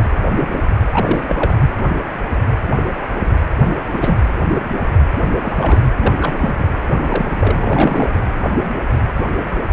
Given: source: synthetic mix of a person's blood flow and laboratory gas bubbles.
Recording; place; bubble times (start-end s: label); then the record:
Doppler ultrasound of blood flow; precordium
0.00-0.07 s: bubbles
0.91-1.24 s: bubbles
1.27-1.54 s: bubbles
3.86-4.18 s: bubbles
5.42-5.91 s: bubbles
5.97-6.14 s: bubbles
6.20-6.56 s: bubbles
6.59-6.65 s: bubbles
7.01-8.19 s: bubbles
From the record:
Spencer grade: 3 (all of the cardiac periods contain showers or single bubble signals, but not dominating or overriding the cardiac motion signals); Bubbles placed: anywhere in the cardiac cycle